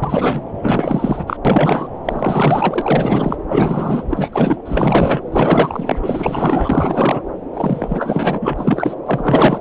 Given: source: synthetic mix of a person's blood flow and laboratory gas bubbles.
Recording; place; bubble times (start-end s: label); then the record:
Doppler ultrasound of blood flow; subclavian vein
0.02-0.41 s: bubbles
0.61-1.37 s: bubbles
1.45-1.88 s: bubbles
2.05-3.36 s: bubbles
3.48-4.04 s: bubbles
4.09-4.62 s: bubbles
4.65-5.21 s: bubbles
5.32-5.98 s: bubbles
6.02-7.22 s: bubbles
7.53-8.38 s: bubbles
8.41-8.95 s: bubbles
9.05-9.61 s: bubbles
From the record:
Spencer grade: 4 (maximum detectable bubble signal sounding continuously throughout systole and diastole of every cardiac period, and overriding the amplitude of the normal cardiac signals); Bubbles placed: anywhere in the cardiac cycle